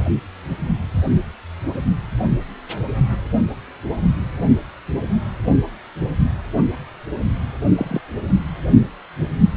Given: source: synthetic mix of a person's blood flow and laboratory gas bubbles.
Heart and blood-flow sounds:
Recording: Doppler ultrasound of blood flow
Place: precordium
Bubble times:
7.75-8.00 s: bubbles
From the record:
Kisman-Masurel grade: 112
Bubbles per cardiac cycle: 1 to 2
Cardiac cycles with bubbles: 1 to 10%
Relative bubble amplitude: moderate (0.250 to 0.450)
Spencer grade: 1 (occasional bubble signal discernible with the cardiac motion signal, with majority of cardiac periods free of bubbles)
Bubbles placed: only in the low amplitude regions of the cardiac cycle

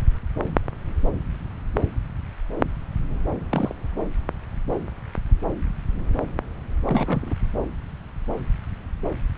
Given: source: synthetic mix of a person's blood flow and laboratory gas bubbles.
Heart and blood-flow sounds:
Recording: Doppler ultrasound of blood flow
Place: subclavian vein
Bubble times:
3.52-3.73 s: bubbles
6.84-7.35 s: bubbles
From the record:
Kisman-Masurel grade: 121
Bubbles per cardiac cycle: 1 to 2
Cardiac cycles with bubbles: 10 to 50%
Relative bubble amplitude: barely perceptible (0.100 to 0.250)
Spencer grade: 2 (many but less than half of the cardiac periods contain bubble signals, singularly or in groups)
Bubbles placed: anywhere in the cardiac cycle

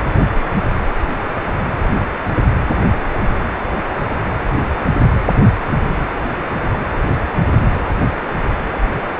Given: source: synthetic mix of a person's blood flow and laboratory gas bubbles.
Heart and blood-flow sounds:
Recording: Doppler ultrasound of blood flow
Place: precordium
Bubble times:
no bubbles
From the record:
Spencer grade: 0 (complete lack of bubble signals)

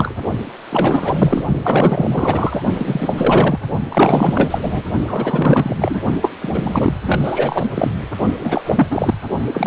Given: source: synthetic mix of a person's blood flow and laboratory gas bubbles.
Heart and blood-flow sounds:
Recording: Doppler ultrasound of blood flow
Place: precordium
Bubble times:
0.00-0.15 s: bubbles
0.70-1.44 s: bubbles
1.63-2.62 s: bubbles
2.75-3.60 s: bubbles
3.89-4.58 s: bubbles
4.62-4.82 s: bubbles
5.07-5.76 s: bubbles
5.79-6.01 s: bubbles
6.21-6.32 s: bubbles
6.41-7.00 s: bubbles
7.06-7.67 s: bubbles
7.74-7.93 s: bubbles
8.39-8.62 s: bubbles
8.66-8.87 s: bubbles
8.91-9.14 s: bubbles
9.54-9.67 s: bubbles
From the record:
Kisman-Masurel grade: 444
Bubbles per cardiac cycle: continuous sound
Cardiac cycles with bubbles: 100%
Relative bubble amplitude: maximal (0.775 to 0.999)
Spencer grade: 4 (maximum detectable bubble signal sounding continuously throughout systole and diastole of every cardiac period, and overriding the amplitude of the normal cardiac signals)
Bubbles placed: only in the low amplitude regions of the cardiac cycle

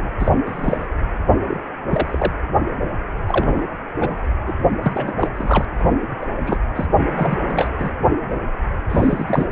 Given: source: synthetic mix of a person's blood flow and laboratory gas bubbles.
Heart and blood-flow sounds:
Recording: Doppler ultrasound of blood flow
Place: precordium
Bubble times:
0.00-0.12 s: bubbles
0.18-0.32 s: bubbles
0.46-0.86 s: bubbles
1.48-1.61 s: bubbles
1.90-2.32 s: bubbles
3.27-3.67 s: bubbles
4.00-4.22 s: bubbles
4.47-4.53 s: bubbles
4.82-5.29 s: bubbles
5.36-5.65 s: bubbles
6.22-6.27 s: bubbles
6.46-6.59 s: bubbles
6.75-6.86 s: bubbles
7.16-7.37 s: bubbles
7.45-7.90 s: bubbles
8.89-9.47 s: bubbles
From the record:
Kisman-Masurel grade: 242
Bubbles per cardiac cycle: several, 3 to 8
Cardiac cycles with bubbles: 100%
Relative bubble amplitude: moderate (0.250 to 0.450)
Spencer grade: 3 (all of the cardiac periods contain showers or single bubble signals, but not dominating or overriding the cardiac motion signals)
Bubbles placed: only in the low amplitude regions of the cardiac cycle

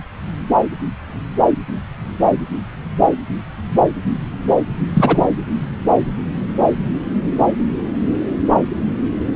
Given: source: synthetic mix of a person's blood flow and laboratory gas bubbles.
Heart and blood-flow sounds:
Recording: Doppler ultrasound of blood flow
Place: subclavian vein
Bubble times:
4.94-5.18 s: bubbles
From the record:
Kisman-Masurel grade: 113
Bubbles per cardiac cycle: 1 to 2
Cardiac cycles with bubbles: 1 to 10%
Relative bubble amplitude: loud (0.450 to 0.775)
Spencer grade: 1 (occasional bubble signal discernible with the cardiac motion signal, with majority of cardiac periods free of bubbles)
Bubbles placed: anywhere in the cardiac cycle

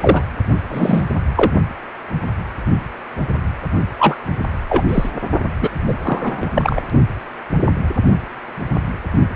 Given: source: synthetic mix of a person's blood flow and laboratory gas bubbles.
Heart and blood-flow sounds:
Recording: Doppler ultrasound of blood flow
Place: precordium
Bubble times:
0.00-0.22 s: bubbles
0.68-1.05 s: bubbles
1.36-1.51 s: bubbles
3.98-4.17 s: bubbles
4.69-4.84 s: bubbles
4.88-5.10 s: bubbles
5.61-5.70 s: bubbles
5.87-5.94 s: bubbles
6.05-6.51 s: bubbles
6.54-6.80 s: bubbles
From the record:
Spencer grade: 2 (many but less than half of the cardiac periods contain bubble signals, singularly or in groups)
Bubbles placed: only in the low amplitude regions of the cardiac cycle

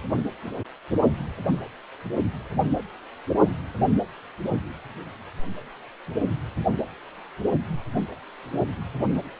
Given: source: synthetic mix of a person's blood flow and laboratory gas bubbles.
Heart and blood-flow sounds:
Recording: Doppler ultrasound of blood flow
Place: precordium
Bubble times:
no bubbles
From the record:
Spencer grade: 0 (complete lack of bubble signals)

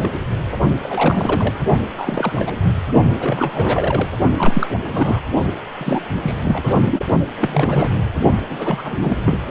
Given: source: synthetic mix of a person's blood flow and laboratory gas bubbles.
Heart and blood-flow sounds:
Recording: Doppler ultrasound of blood flow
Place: precordium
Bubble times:
0.00-0.09 s: bubbles
0.83-1.54 s: bubbles
1.96-2.33 s: bubbles
2.36-2.53 s: bubbles
2.63-2.68 s: bubbles
3.19-4.09 s: bubbles
4.38-4.67 s: bubbles
4.82-4.91 s: bubbles
4.93-5.21 s: bubbles
5.78-6.01 s: bubbles
6.21-6.36 s: bubbles
6.43-6.76 s: bubbles
6.91-7.00 s: bubbles
7.39-8.01 s: bubbles
8.49-8.82 s: bubbles
8.85-9.18 s: bubbles
9.24-9.38 s: bubbles
From the record:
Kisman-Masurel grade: 342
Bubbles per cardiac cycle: rolling drumbeat, 9 or more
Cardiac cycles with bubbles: 100%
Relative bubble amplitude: moderate (0.250 to 0.450)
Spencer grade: 3 (all of the cardiac periods contain showers or single bubble signals, but not dominating or overriding the cardiac motion signals)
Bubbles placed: only in the low amplitude regions of the cardiac cycle

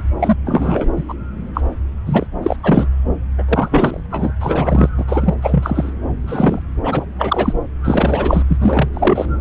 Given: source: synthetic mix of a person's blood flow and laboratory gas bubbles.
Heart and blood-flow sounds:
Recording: Doppler ultrasound of blood flow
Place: subclavian vein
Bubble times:
0.20-0.35 s: bubbles
0.45-0.86 s: bubbles
0.97-1.03 s: bubbles
1.08-1.14 s: bubbles
1.54-1.61 s: bubbles
2.05-2.26 s: bubbles
2.42-2.57 s: bubbles
2.63-2.88 s: bubbles
3.38-3.45 s: bubbles
3.48-4.00 s: bubbles
4.10-4.32 s: bubbles
4.40-4.89 s: bubbles
4.97-5.34 s: bubbles
5.42-5.93 s: bubbles
6.27-6.59 s: bubbles
6.83-7.05 s: bubbles
7.18-7.53 s: bubbles
7.83-8.42 s: bubbles
8.48-8.57 s: bubbles
8.60-8.88 s: bubbles
8.94-9.25 s: bubbles
From the record:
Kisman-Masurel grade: 243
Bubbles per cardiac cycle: several, 3 to 8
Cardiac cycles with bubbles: 100%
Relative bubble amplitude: loud (0.450 to 0.775)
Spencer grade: 3 (all of the cardiac periods contain showers or single bubble signals, but not dominating or overriding the cardiac motion signals)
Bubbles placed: anywhere in the cardiac cycle

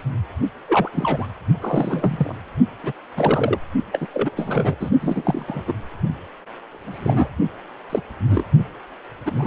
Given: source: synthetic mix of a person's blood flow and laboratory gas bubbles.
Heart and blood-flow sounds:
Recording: Doppler ultrasound of blood flow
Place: precordium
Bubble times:
0.00-0.03 s: bubbles
0.68-0.89 s: bubbles
0.94-1.27 s: bubbles
1.60-2.35 s: bubbles
2.83-2.92 s: bubbles
3.17-3.58 s: bubbles
3.92-4.07 s: bubbles
4.11-4.76 s: bubbles
4.79-4.90 s: bubbles
5.01-5.62 s: bubbles
5.67-5.74 s: bubbles
6.71-7.29 s: bubbles
7.89-8.01 s: bubbles
8.30-8.44 s: bubbles
9.26-9.47 s: bubbles
From the record:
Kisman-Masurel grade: 242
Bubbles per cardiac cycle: several, 3 to 8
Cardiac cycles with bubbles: 100%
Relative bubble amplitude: moderate (0.250 to 0.450)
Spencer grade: 3 (all of the cardiac periods contain showers or single bubble signals, but not dominating or overriding the cardiac motion signals)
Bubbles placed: only in the low amplitude regions of the cardiac cycle

